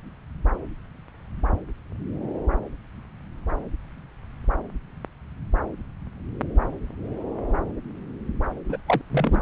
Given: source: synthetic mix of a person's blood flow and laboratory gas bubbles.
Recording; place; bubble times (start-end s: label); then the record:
Doppler ultrasound of blood flow; subclavian vein
8.69-8.77 s: bubbles
8.86-9.02 s: bubbles
9.10-9.42 s: bubbles
From the record:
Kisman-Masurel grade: 212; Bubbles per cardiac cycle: several, 3 to 8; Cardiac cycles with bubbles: 1 to 10%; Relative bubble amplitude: moderate (0.250 to 0.450); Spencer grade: 1 (occasional bubble signal discernible with the cardiac motion signal, with majority of cardiac periods free of bubbles); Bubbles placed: anywhere in the cardiac cycle